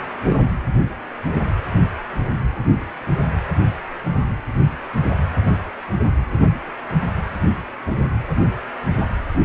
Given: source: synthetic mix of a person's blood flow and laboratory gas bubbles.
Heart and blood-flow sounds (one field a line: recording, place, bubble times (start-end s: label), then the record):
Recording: Doppler ultrasound of blood flow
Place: precordium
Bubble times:
0.26-0.48 s: bubbles
From the record:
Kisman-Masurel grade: 112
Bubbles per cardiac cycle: 1 to 2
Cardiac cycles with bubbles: 1 to 10%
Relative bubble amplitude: moderate (0.250 to 0.450)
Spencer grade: 1 (occasional bubble signal discernible with the cardiac motion signal, with majority of cardiac periods free of bubbles)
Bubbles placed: anywhere in the cardiac cycle